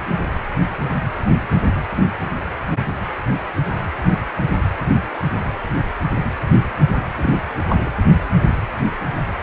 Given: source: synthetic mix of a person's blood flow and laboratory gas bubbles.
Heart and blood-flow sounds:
Doppler ultrasound of blood flow; precordium
7.15-7.39 s: bubbles
7.68-7.76 s: bubbles
7.80-7.89 s: bubbles
From the record:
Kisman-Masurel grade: 212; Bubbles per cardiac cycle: several, 3 to 8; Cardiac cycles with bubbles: 1 to 10%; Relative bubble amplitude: moderate (0.250 to 0.450); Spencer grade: 1 (occasional bubble signal discernible with the cardiac motion signal, with majority of cardiac periods free of bubbles); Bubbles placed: anywhere in the cardiac cycle

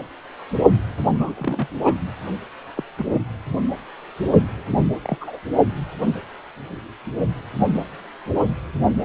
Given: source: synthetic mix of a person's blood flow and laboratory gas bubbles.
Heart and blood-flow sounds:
Doppler ultrasound of blood flow; precordium
1.12-1.67 s: bubbles
1.83-1.96 s: bubbles
2.77-2.83 s: bubbles
2.98-3.21 s: bubbles
4.71-4.86 s: bubbles
5.03-5.18 s: bubbles
5.21-5.39 s: bubbles
From the record:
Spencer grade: 2 (many but less than half of the cardiac periods contain bubble signals, singularly or in groups); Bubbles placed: anywhere in the cardiac cycle

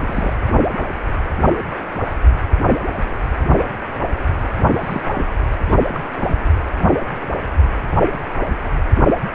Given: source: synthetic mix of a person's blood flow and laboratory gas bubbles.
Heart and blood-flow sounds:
Doppler ultrasound of blood flow; precordium
0.07-0.37 s: bubbles
4.74-5.01 s: bubbles
5.13-5.25 s: bubbles
5.68-5.77 s: bubbles
5.93-6.05 s: bubbles
6.21-6.36 s: bubbles
From the record:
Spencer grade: 2 (many but less than half of the cardiac periods contain bubble signals, singularly or in groups); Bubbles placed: anywhere in the cardiac cycle

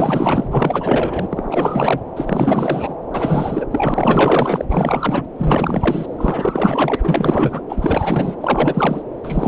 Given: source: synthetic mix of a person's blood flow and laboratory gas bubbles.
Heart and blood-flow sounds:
Doppler ultrasound of blood flow; subclavian vein
0.00-2.01 s: bubbles
2.16-2.95 s: bubbles
3.14-3.66 s: bubbles
3.71-4.65 s: bubbles
4.69-5.25 s: bubbles
5.38-6.06 s: bubbles
6.18-6.96 s: bubbles
7.03-7.60 s: bubbles
7.68-8.36 s: bubbles
8.41-9.03 s: bubbles
9.23-9.48 s: bubbles
From the record:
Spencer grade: 4 (maximum detectable bubble signal sounding continuously throughout systole and diastole of every cardiac period, and overriding the amplitude of the normal cardiac signals); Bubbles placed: anywhere in the cardiac cycle

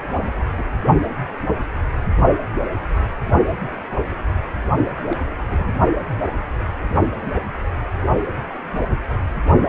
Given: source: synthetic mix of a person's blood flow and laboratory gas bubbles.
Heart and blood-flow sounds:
Doppler ultrasound of blood flow; precordium
0.00-0.44 s: bubbles
0.54-0.65 s: bubbles
5.06-5.16 s: bubbles
5.48-5.72 s: bubbles
From the record:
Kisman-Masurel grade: 221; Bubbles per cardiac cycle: several, 3 to 8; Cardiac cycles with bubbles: 10 to 50%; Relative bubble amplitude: barely perceptible (0.100 to 0.250); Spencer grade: 2 (many but less than half of the cardiac periods contain bubble signals, singularly or in groups); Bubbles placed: only in the low amplitude regions of the cardiac cycle

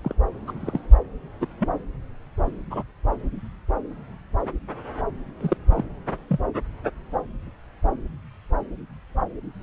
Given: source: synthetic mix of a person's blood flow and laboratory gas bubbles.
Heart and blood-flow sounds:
Doppler ultrasound of blood flow; subclavian vein
0.03-0.14 s: bubbles
0.47-0.53 s: bubbles
0.60-0.80 s: bubbles
1.41-1.47 s: bubbles
1.59-1.69 s: bubbles
2.70-2.83 s: bubbles
5.41-5.57 s: bubbles
5.70-5.84 s: bubbles
6.28-6.39 s: bubbles
From the record:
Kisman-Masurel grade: 122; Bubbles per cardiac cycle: 1 to 2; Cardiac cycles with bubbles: 10 to 50%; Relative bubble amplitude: moderate (0.250 to 0.450); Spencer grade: 2 (many but less than half of the cardiac periods contain bubble signals, singularly or in groups); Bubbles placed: anywhere in the cardiac cycle

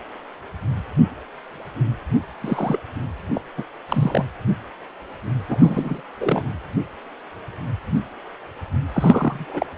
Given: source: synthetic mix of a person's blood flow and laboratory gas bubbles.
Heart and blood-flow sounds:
Doppler ultrasound of blood flow; precordium
2.42-2.79 s: bubbles
3.34-3.42 s: bubbles
3.57-3.64 s: bubbles
3.88-4.25 s: bubbles
5.49-6.01 s: bubbles
6.20-6.43 s: bubbles
8.93-9.46 s: bubbles
9.49-9.66 s: bubbles
9.76-9.78 s: bubbles
From the record:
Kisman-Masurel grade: 222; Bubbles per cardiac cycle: several, 3 to 8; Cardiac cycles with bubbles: 10 to 50%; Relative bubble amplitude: moderate (0.250 to 0.450); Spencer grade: 2 (many but less than half of the cardiac periods contain bubble signals, singularly or in groups); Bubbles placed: anywhere in the cardiac cycle

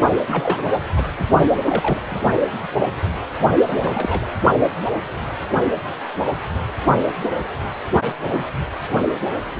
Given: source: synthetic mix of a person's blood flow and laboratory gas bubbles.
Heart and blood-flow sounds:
Doppler ultrasound of blood flow; precordium
0.27-0.64 s: bubbles
0.95-1.04 s: bubbles
1.19-1.29 s: bubbles
1.64-2.20 s: bubbles
3.67-4.26 s: bubbles
8.01-8.13 s: bubbles
8.24-8.45 s: bubbles
From the record:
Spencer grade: 2 (many but less than half of the cardiac periods contain bubble signals, singularly or in groups); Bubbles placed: only in the low amplitude regions of the cardiac cycle

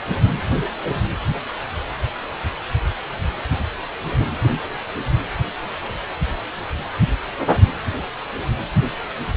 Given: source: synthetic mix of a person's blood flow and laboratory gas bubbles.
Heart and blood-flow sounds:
Doppler ultrasound of blood flow; precordium
no bubbles
From the record:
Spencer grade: 0 (complete lack of bubble signals)

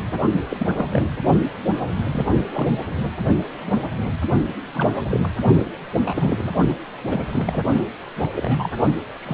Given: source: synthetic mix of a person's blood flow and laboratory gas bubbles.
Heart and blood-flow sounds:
Doppler ultrasound of blood flow; precordium
0.49-1.02 s: bubbles
2.09-2.33 s: bubbles
2.53-2.67 s: bubbles
4.74-5.00 s: bubbles
5.10-5.28 s: bubbles
5.98-6.51 s: bubbles
6.68-6.77 s: bubbles
7.09-7.24 s: bubbles
7.29-7.63 s: bubbles
8.20-8.30 s: bubbles
8.36-8.69 s: bubbles
9.20-9.34 s: bubbles
From the record:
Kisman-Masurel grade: 232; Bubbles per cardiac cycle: several, 3 to 8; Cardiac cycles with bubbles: 50 to 99%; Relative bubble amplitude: moderate (0.250 to 0.450); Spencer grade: 3 (all of the cardiac periods contain showers or single bubble signals, but not dominating or overriding the cardiac motion signals); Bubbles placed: only in the low amplitude regions of the cardiac cycle

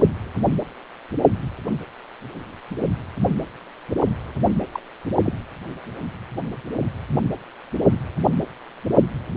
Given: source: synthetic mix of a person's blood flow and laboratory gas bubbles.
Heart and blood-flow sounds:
Doppler ultrasound of blood flow; precordium
4.72-4.80 s: bubbles
5.25-5.32 s: bubbles
From the record:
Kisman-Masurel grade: 112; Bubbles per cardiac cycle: 1 to 2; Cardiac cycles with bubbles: 1 to 10%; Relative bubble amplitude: moderate (0.250 to 0.450); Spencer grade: 1 (occasional bubble signal discernible with the cardiac motion signal, with majority of cardiac periods free of bubbles); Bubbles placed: only in the low amplitude regions of the cardiac cycle

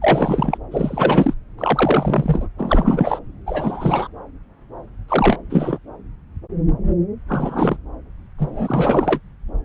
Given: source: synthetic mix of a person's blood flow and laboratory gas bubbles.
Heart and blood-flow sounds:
Doppler ultrasound of blood flow; subclavian vein
0.01-0.58 s: bubbles
0.71-1.33 s: bubbles
1.58-2.48 s: bubbles
2.58-3.19 s: bubbles
3.46-4.08 s: bubbles
5.08-5.39 s: bubbles
5.50-5.78 s: bubbles
7.28-7.77 s: bubbles
8.38-9.19 s: bubbles
From the record:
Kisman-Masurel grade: 333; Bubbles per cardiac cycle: rolling drumbeat, 9 or more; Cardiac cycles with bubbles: 50 to 99%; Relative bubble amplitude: loud (0.450 to 0.775); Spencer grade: 3 (all of the cardiac periods contain showers or single bubble signals, but not dominating or overriding the cardiac motion signals); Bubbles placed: anywhere in the cardiac cycle

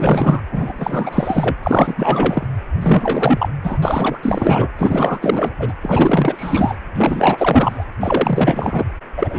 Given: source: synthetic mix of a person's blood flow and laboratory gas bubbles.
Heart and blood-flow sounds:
Doppler ultrasound of blood flow; precordium
0.00-0.41 s: bubbles
0.51-0.73 s: bubbles
0.76-1.55 s: bubbles
1.62-2.47 s: bubbles
2.81-3.49 s: bubbles
3.62-3.80 s: bubbles
3.82-4.18 s: bubbles
4.22-4.70 s: bubbles
4.75-5.53 s: bubbles
5.59-5.73 s: bubbles
5.81-6.77 s: bubbles
6.94-7.85 s: bubbles
7.99-8.84 s: bubbles
9.17-9.39 s: bubbles
From the record:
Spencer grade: 4 (maximum detectable bubble signal sounding continuously throughout systole and diastole of every cardiac period, and overriding the amplitude of the normal cardiac signals); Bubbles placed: anywhere in the cardiac cycle

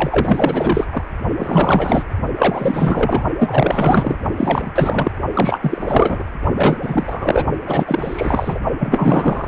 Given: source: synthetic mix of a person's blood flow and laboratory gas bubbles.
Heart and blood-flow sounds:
Doppler ultrasound of blood flow; precordium
0.00-0.84 s: bubbles
0.92-1.03 s: bubbles
1.37-2.04 s: bubbles
2.38-3.22 s: bubbles
3.38-4.18 s: bubbles
4.37-4.71 s: bubbles
4.75-5.11 s: bubbles
5.33-6.24 s: bubbles
6.57-6.79 s: bubbles
6.82-7.46 s: bubbles
7.66-8.59 s: bubbles
8.79-9.48 s: bubbles
From the record:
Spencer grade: 4 (maximum detectable bubble signal sounding continuously throughout systole and diastole of every cardiac period, and overriding the amplitude of the normal cardiac signals); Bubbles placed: only in the low amplitude regions of the cardiac cycle

